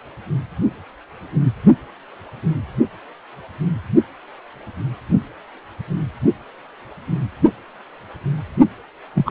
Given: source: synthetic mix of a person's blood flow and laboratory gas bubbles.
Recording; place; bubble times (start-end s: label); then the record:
Doppler ultrasound of blood flow; precordium
9.15-9.31 s: bubbles
From the record:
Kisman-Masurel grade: 213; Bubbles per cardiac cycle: several, 3 to 8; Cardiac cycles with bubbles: 1 to 10%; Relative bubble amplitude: loud (0.450 to 0.775); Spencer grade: 1 (occasional bubble signal discernible with the cardiac motion signal, with majority of cardiac periods free of bubbles); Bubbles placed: only in the low amplitude regions of the cardiac cycle